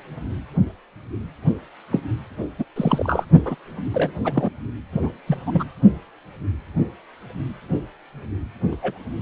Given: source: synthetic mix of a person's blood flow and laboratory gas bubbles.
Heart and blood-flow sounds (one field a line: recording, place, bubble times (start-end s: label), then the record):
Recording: Doppler ultrasound of blood flow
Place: precordium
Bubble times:
1.91-1.99 s: bubbles
2.58-2.65 s: bubbles
2.76-3.25 s: bubbles
3.44-3.55 s: bubbles
3.93-4.12 s: bubbles
4.25-4.50 s: bubbles
4.92-5.09 s: bubbles
5.27-5.37 s: bubbles
5.46-5.64 s: bubbles
8.71-8.76 s: bubbles
8.82-8.98 s: bubbles
From the record:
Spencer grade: 3 (all of the cardiac periods contain showers or single bubble signals, but not dominating or overriding the cardiac motion signals)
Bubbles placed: only in the low amplitude regions of the cardiac cycle